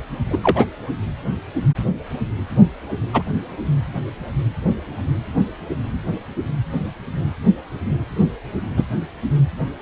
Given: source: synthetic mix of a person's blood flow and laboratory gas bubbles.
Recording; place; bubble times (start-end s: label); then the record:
Doppler ultrasound of blood flow; precordium
0.30-0.40 s: bubbles
0.43-0.65 s: bubbles
3.13-3.23 s: bubbles
8.77-8.83 s: bubbles
From the record:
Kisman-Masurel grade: 123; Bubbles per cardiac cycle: 1 to 2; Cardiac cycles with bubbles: 10 to 50%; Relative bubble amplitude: loud (0.450 to 0.775); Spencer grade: 2 (many but less than half of the cardiac periods contain bubble signals, singularly or in groups); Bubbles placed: anywhere in the cardiac cycle